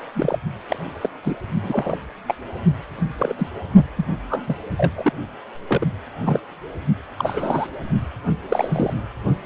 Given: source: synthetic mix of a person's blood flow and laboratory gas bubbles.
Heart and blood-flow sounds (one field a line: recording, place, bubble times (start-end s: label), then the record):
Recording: Doppler ultrasound of blood flow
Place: precordium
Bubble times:
0.13-0.39 s: bubbles
0.69-0.78 s: bubbles
1.02-1.09 s: bubbles
1.23-1.34 s: bubbles
1.62-1.97 s: bubbles
2.28-2.34 s: bubbles
3.19-3.33 s: bubbles
3.38-3.51 s: bubbles
3.97-4.05 s: bubbles
4.29-4.42 s: bubbles
4.46-4.57 s: bubbles
4.77-4.92 s: bubbles
4.96-5.12 s: bubbles
5.68-5.86 s: bubbles
6.18-6.39 s: bubbles
7.17-7.67 s: bubbles
8.48-8.94 s: bubbles
From the record:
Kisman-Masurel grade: 242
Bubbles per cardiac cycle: several, 3 to 8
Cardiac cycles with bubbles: 100%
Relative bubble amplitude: moderate (0.250 to 0.450)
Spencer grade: 3 (all of the cardiac periods contain showers or single bubble signals, but not dominating or overriding the cardiac motion signals)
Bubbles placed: only in the low amplitude regions of the cardiac cycle